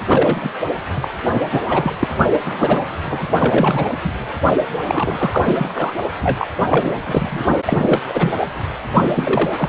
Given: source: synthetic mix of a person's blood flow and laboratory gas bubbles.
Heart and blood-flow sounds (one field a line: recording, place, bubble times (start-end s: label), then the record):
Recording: Doppler ultrasound of blood flow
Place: precordium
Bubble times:
0.07-0.52 s: bubbles
0.96-1.08 s: bubbles
1.34-1.43 s: bubbles
1.51-1.60 s: bubbles
1.64-1.94 s: bubbles
1.99-2.08 s: bubbles
2.32-2.40 s: bubbles
2.46-2.84 s: bubbles
3.04-3.27 s: bubbles
3.38-3.90 s: bubbles
4.04-4.12 s: bubbles
4.88-5.93 s: bubbles
6.22-6.47 s: bubbles
6.69-6.97 s: bubbles
7.03-7.46 s: bubbles
7.67-8.00 s: bubbles
8.09-8.33 s: bubbles
8.39-8.47 s: bubbles
8.95-9.50 s: bubbles
9.56-9.69 s: bubbles
From the record:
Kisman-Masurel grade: 342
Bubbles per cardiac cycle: rolling drumbeat, 9 or more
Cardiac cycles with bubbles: 100%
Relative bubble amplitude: moderate (0.250 to 0.450)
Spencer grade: 3 (all of the cardiac periods contain showers or single bubble signals, but not dominating or overriding the cardiac motion signals)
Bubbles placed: only in the low amplitude regions of the cardiac cycle